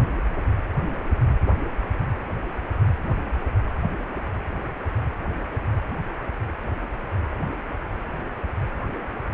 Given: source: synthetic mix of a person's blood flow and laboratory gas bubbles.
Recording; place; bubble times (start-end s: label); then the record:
Doppler ultrasound of blood flow; precordium
no bubbles
From the record:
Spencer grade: 0 (complete lack of bubble signals)